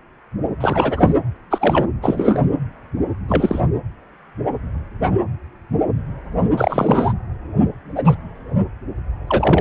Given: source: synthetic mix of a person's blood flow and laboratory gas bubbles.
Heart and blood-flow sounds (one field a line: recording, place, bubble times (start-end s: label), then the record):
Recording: Doppler ultrasound of blood flow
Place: precordium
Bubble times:
0.60-1.13 s: bubbles
1.50-1.86 s: bubbles
2.02-2.41 s: bubbles
3.27-3.62 s: bubbles
6.57-7.13 s: bubbles
7.95-8.02 s: bubbles
8.05-8.15 s: bubbles
9.27-9.61 s: bubbles
From the record:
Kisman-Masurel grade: 223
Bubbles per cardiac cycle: several, 3 to 8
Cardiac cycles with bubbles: 10 to 50%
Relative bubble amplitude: loud (0.450 to 0.775)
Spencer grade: 2 (many but less than half of the cardiac periods contain bubble signals, singularly or in groups)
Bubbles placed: anywhere in the cardiac cycle